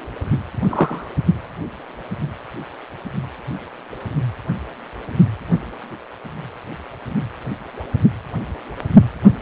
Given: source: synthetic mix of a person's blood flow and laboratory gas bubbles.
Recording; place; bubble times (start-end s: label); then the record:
Doppler ultrasound of blood flow; precordium
0.69-1.10 s: bubbles
From the record:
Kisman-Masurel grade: 113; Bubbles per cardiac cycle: 1 to 2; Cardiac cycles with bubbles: 1 to 10%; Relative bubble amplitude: loud (0.450 to 0.775); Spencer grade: 1 (occasional bubble signal discernible with the cardiac motion signal, with majority of cardiac periods free of bubbles); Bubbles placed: only in the low amplitude regions of the cardiac cycle